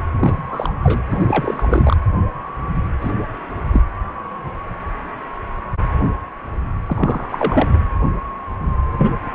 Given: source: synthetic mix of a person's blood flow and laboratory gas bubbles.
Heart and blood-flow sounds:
Doppler ultrasound of blood flow; precordium
0.17-0.74 s: bubbles
0.83-1.03 s: bubbles
1.09-1.96 s: bubbles
3.01-3.12 s: bubbles
3.71-3.82 s: bubbles
6.87-7.29 s: bubbles
7.31-7.69 s: bubbles
7.73-7.78 s: bubbles
8.98-9.17 s: bubbles
From the record:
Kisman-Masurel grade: 222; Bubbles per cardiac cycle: several, 3 to 8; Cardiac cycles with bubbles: 10 to 50%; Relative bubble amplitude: moderate (0.250 to 0.450); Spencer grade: 2 (many but less than half of the cardiac periods contain bubble signals, singularly or in groups); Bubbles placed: anywhere in the cardiac cycle

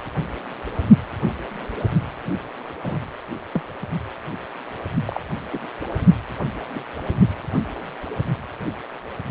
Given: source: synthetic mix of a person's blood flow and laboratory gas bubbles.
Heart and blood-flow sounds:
Doppler ultrasound of blood flow; precordium
2.82-2.99 s: bubbles
3.54-3.61 s: bubbles
5.07-5.21 s: bubbles
5.51-5.59 s: bubbles
6.74-6.83 s: bubbles
From the record:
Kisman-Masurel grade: 121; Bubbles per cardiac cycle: 1 to 2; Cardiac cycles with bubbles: 10 to 50%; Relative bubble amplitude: barely perceptible (0.100 to 0.250); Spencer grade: 2 (many but less than half of the cardiac periods contain bubble signals, singularly or in groups); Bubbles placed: only in the low amplitude regions of the cardiac cycle

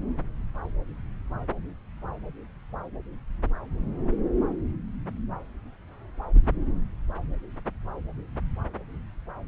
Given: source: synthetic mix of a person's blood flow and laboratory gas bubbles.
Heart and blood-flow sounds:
Doppler ultrasound of blood flow; subclavian vein
no bubbles
From the record:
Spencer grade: 0 (complete lack of bubble signals)

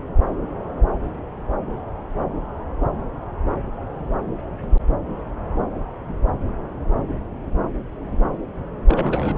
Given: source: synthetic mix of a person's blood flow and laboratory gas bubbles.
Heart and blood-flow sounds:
Doppler ultrasound of blood flow; subclavian vein
8.89-9.38 s: bubbles
From the record:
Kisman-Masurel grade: 211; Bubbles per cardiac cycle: several, 3 to 8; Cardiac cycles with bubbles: 1 to 10%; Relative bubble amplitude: barely perceptible (0.100 to 0.250); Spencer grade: 1 (occasional bubble signal discernible with the cardiac motion signal, with majority of cardiac periods free of bubbles); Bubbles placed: anywhere in the cardiac cycle

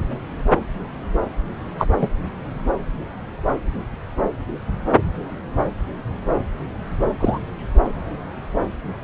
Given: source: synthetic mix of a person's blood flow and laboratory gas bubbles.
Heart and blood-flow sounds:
Doppler ultrasound of blood flow; subclavian vein
1.78-1.88 s: bubbles
2.01-2.09 s: bubbles
7.20-7.38 s: bubbles
From the record:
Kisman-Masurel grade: 113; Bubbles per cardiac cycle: 1 to 2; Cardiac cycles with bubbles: 1 to 10%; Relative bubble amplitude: loud (0.450 to 0.775); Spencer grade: 1 (occasional bubble signal discernible with the cardiac motion signal, with majority of cardiac periods free of bubbles); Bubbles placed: anywhere in the cardiac cycle

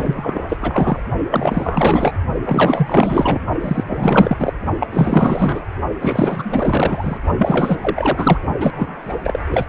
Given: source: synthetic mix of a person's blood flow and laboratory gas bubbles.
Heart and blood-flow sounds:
Doppler ultrasound of blood flow; precordium
0.00-0.99 s: bubbles
1.30-2.14 s: bubbles
2.44-3.40 s: bubbles
3.60-3.84 s: bubbles
3.88-4.37 s: bubbles
4.39-4.53 s: bubbles
4.79-4.87 s: bubbles
4.92-5.66 s: bubbles
6.01-7.17 s: bubbles
7.38-8.38 s: bubbles
8.60-9.41 s: bubbles
9.49-9.66 s: bubbles
From the record:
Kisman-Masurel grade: 444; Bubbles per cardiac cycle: continuous sound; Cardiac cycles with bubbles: 100%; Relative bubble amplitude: maximal (0.775 to 0.999); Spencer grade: 4 (maximum detectable bubble signal sounding continuously throughout systole and diastole of every cardiac period, and overriding the amplitude of the normal cardiac signals); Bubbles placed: only in the low amplitude regions of the cardiac cycle

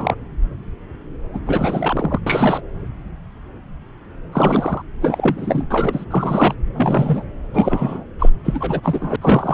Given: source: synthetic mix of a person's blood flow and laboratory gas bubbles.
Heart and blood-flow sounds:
Doppler ultrasound of blood flow; subclavian vein
0.00-0.15 s: bubbles
1.33-1.40 s: bubbles
1.46-2.20 s: bubbles
2.26-2.60 s: bubbles
4.32-4.82 s: bubbles
5.01-5.64 s: bubbles
5.70-6.04 s: bubbles
6.10-6.55 s: bubbles
6.75-7.23 s: bubbles
7.54-8.06 s: bubbles
8.19-8.29 s: bubbles
8.44-8.80 s: bubbles
8.83-9.16 s: bubbles
9.21-9.54 s: bubbles
From the record:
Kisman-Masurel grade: 332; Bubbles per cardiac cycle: rolling drumbeat, 9 or more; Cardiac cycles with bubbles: 50 to 99%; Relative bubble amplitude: moderate (0.250 to 0.450); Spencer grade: 3 (all of the cardiac periods contain showers or single bubble signals, but not dominating or overriding the cardiac motion signals); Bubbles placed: anywhere in the cardiac cycle

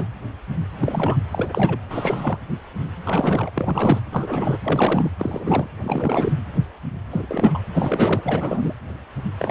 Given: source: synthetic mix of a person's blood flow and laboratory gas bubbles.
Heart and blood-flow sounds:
Doppler ultrasound of blood flow; precordium
0.00-0.09 s: bubbles
0.79-1.18 s: bubbles
1.31-1.78 s: bubbles
1.90-2.37 s: bubbles
3.06-3.51 s: bubbles
3.55-4.01 s: bubbles
4.12-4.58 s: bubbles
4.64-5.10 s: bubbles
5.19-5.67 s: bubbles
5.83-6.36 s: bubbles
7.11-7.59 s: bubbles
7.73-8.21 s: bubbles
8.25-8.75 s: bubbles
9.39-9.50 s: bubbles
From the record:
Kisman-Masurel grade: 332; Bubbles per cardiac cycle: rolling drumbeat, 9 or more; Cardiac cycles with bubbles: 50 to 99%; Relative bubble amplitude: moderate (0.250 to 0.450); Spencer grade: 3 (all of the cardiac periods contain showers or single bubble signals, but not dominating or overriding the cardiac motion signals); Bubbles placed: anywhere in the cardiac cycle

